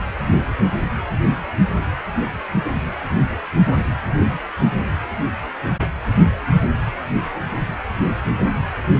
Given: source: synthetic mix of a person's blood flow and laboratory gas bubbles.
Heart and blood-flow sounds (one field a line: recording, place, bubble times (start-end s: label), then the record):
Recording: Doppler ultrasound of blood flow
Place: precordium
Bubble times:
6.62-6.75 s: bubbles
From the record:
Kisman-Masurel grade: 111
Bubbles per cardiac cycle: 1 to 2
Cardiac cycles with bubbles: 1 to 10%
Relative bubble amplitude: barely perceptible (0.100 to 0.250)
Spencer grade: 1 (occasional bubble signal discernible with the cardiac motion signal, with majority of cardiac periods free of bubbles)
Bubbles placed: anywhere in the cardiac cycle